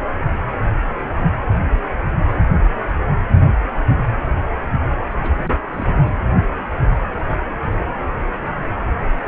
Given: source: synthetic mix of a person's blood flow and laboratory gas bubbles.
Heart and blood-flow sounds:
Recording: Doppler ultrasound of blood flow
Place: precordium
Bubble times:
5.19-5.66 s: bubbles
5.69-5.95 s: bubbles
6.04-6.15 s: bubbles
From the record:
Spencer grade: 2 (many but less than half of the cardiac periods contain bubble signals, singularly or in groups)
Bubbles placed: anywhere in the cardiac cycle

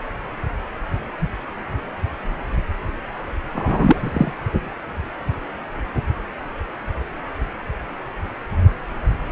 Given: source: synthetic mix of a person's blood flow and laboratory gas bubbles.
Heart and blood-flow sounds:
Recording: Doppler ultrasound of blood flow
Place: precordium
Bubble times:
3.54-4.31 s: bubbles
From the record:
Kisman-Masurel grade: 213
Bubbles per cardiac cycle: several, 3 to 8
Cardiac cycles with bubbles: 1 to 10%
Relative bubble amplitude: loud (0.450 to 0.775)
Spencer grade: 1 (occasional bubble signal discernible with the cardiac motion signal, with majority of cardiac periods free of bubbles)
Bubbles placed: only in the low amplitude regions of the cardiac cycle

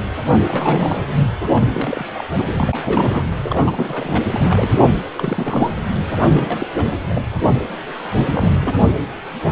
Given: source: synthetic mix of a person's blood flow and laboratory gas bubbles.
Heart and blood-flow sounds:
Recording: Doppler ultrasound of blood flow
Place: precordium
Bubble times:
0.47-1.08 s: bubbles
1.54-2.10 s: bubbles
2.15-2.25 s: bubbles
2.39-2.45 s: bubbles
2.50-3.25 s: bubbles
3.44-4.25 s: bubbles
4.30-4.95 s: bubbles
5.17-5.71 s: bubbles
6.33-6.67 s: bubbles
6.77-6.93 s: bubbles
7.09-7.23 s: bubbles
8.18-8.53 s: bubbles
8.60-8.76 s: bubbles
From the record:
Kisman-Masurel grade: 332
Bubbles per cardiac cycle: rolling drumbeat, 9 or more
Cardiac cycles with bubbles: 50 to 99%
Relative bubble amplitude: moderate (0.250 to 0.450)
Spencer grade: 3 (all of the cardiac periods contain showers or single bubble signals, but not dominating or overriding the cardiac motion signals)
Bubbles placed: anywhere in the cardiac cycle

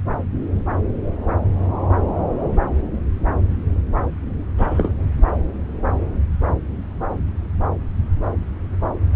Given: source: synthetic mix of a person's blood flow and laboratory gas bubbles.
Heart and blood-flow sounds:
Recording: Doppler ultrasound of blood flow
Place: subclavian vein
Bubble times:
4.57-4.92 s: bubbles
From the record:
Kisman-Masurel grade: 113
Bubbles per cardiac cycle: 1 to 2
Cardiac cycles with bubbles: 1 to 10%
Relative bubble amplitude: loud (0.450 to 0.775)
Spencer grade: 1 (occasional bubble signal discernible with the cardiac motion signal, with majority of cardiac periods free of bubbles)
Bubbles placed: anywhere in the cardiac cycle

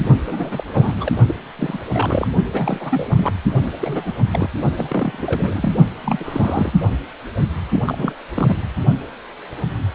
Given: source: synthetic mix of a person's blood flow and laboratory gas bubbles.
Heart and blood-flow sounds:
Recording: Doppler ultrasound of blood flow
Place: precordium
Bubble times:
0.27-1.12 s: bubbles
1.27-1.34 s: bubbles
1.58-1.78 s: bubbles
1.92-2.27 s: bubbles
2.52-3.32 s: bubbles
3.63-3.71 s: bubbles
3.81-4.12 s: bubbles
4.32-4.50 s: bubbles
4.77-5.72 s: bubbles
6.04-6.72 s: bubbles
7.71-8.14 s: bubbles
8.34-8.56 s: bubbles
From the record:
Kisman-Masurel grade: 332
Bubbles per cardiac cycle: rolling drumbeat, 9 or more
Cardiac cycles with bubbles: 50 to 99%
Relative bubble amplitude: moderate (0.250 to 0.450)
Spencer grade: 3 (all of the cardiac periods contain showers or single bubble signals, but not dominating or overriding the cardiac motion signals)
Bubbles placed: only in the low amplitude regions of the cardiac cycle

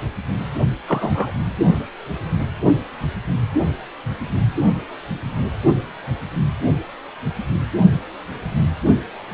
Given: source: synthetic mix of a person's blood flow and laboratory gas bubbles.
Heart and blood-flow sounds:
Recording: Doppler ultrasound of blood flow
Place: precordium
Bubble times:
0.88-1.31 s: bubbles
From the record:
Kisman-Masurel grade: 113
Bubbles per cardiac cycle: 1 to 2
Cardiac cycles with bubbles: 1 to 10%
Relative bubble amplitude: loud (0.450 to 0.775)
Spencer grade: 1 (occasional bubble signal discernible with the cardiac motion signal, with majority of cardiac periods free of bubbles)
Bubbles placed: only in the low amplitude regions of the cardiac cycle

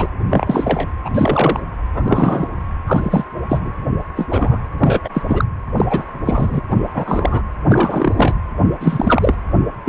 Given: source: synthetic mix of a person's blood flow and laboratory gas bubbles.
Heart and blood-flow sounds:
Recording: Doppler ultrasound of blood flow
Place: precordium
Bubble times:
0.00-0.08 s: bubbles
0.29-0.88 s: bubbles
1.04-1.10 s: bubbles
1.14-1.62 s: bubbles
1.94-2.50 s: bubbles
2.86-3.25 s: bubbles
3.49-3.71 s: bubbles
4.16-4.28 s: bubbles
4.31-4.61 s: bubbles
4.79-5.01 s: bubbles
5.04-5.10 s: bubbles
5.14-5.22 s: bubbles
5.28-5.45 s: bubbles
5.76-5.86 s: bubbles
5.90-6.04 s: bubbles
6.25-6.61 s: bubbles
6.71-6.77 s: bubbles
6.94-7.43 s: bubbles
7.67-8.35 s: bubbles
8.80-9.35 s: bubbles
9.86-9.89 s: bubbles
From the record:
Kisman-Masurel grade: 243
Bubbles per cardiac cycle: several, 3 to 8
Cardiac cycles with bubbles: 100%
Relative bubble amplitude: loud (0.450 to 0.775)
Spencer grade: 3 (all of the cardiac periods contain showers or single bubble signals, but not dominating or overriding the cardiac motion signals)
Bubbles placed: anywhere in the cardiac cycle

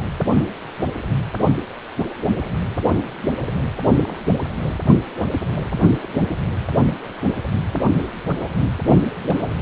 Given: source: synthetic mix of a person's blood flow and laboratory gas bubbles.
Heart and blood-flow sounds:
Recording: Doppler ultrasound of blood flow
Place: precordium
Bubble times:
3.41-3.65 s: bubbles
4.04-4.21 s: bubbles
5.94-5.98 s: bubbles
6.03-6.08 s: bubbles
8.94-9.00 s: bubbles
9.22-9.37 s: bubbles
From the record:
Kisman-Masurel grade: 121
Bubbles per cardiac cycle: 1 to 2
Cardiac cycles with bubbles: 10 to 50%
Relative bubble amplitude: barely perceptible (0.100 to 0.250)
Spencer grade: 2 (many but less than half of the cardiac periods contain bubble signals, singularly or in groups)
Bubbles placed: anywhere in the cardiac cycle

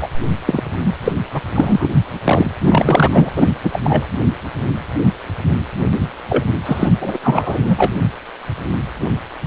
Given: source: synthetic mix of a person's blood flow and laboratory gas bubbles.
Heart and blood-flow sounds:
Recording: Doppler ultrasound of blood flow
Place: precordium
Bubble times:
0.01-0.08 s: bubbles
0.46-0.62 s: bubbles
0.84-0.95 s: bubbles
1.04-1.12 s: bubbles
1.33-1.41 s: bubbles
1.55-1.90 s: bubbles
2.25-2.50 s: bubbles
2.60-3.08 s: bubbles
3.11-3.31 s: bubbles
3.35-3.53 s: bubbles
3.63-3.80 s: bubbles
3.83-4.07 s: bubbles
6.29-6.44 s: bubbles
6.66-6.92 s: bubbles
7.01-7.18 s: bubbles
7.22-7.91 s: bubbles
From the record:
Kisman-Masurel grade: 333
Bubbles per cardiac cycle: rolling drumbeat, 9 or more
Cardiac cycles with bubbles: 50 to 99%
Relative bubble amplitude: loud (0.450 to 0.775)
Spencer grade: 3 (all of the cardiac periods contain showers or single bubble signals, but not dominating or overriding the cardiac motion signals)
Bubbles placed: anywhere in the cardiac cycle

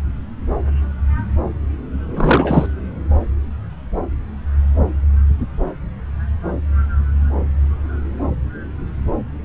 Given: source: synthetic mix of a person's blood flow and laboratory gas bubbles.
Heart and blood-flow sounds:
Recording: Doppler ultrasound of blood flow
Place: subclavian vein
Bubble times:
2.16-2.67 s: bubbles
From the record:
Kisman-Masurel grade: 213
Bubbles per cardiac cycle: several, 3 to 8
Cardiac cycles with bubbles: 1 to 10%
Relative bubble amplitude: loud (0.450 to 0.775)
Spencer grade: 1 (occasional bubble signal discernible with the cardiac motion signal, with majority of cardiac periods free of bubbles)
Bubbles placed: anywhere in the cardiac cycle

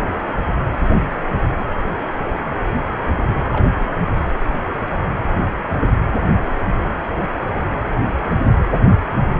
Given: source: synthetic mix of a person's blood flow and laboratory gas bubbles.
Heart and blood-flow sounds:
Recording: Doppler ultrasound of blood flow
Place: precordium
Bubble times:
3.31-3.42 s: bubbles
3.49-3.72 s: bubbles
From the record:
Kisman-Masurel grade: 111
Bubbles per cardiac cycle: 1 to 2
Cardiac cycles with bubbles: 1 to 10%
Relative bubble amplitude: barely perceptible (0.100 to 0.250)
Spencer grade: 1 (occasional bubble signal discernible with the cardiac motion signal, with majority of cardiac periods free of bubbles)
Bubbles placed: anywhere in the cardiac cycle

